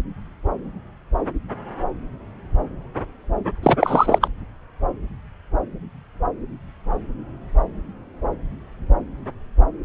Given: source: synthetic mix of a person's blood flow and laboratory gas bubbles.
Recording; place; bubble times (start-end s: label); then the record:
Doppler ultrasound of blood flow; subclavian vein
3.62-3.77 s: bubbles
3.80-4.19 s: bubbles
4.21-4.28 s: bubbles
From the record:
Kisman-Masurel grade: 213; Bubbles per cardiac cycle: several, 3 to 8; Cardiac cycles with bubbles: 1 to 10%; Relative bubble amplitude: loud (0.450 to 0.775); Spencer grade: 1 (occasional bubble signal discernible with the cardiac motion signal, with majority of cardiac periods free of bubbles); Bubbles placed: anywhere in the cardiac cycle